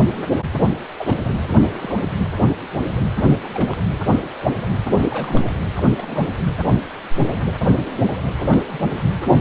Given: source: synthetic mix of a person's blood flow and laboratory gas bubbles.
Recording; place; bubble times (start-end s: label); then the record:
Doppler ultrasound of blood flow; precordium
0.96-1.16 s: bubbles
1.52-1.60 s: bubbles
1.62-2.13 s: bubbles
3.43-3.49 s: bubbles
3.53-3.81 s: bubbles
4.89-5.04 s: bubbles
5.08-5.51 s: bubbles
5.76-6.26 s: bubbles
8.38-8.59 s: bubbles
8.67-8.80 s: bubbles
From the record:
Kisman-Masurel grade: 221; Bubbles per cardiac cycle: several, 3 to 8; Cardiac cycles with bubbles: 10 to 50%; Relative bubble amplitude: barely perceptible (0.100 to 0.250); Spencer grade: 2 (many but less than half of the cardiac periods contain bubble signals, singularly or in groups); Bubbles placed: anywhere in the cardiac cycle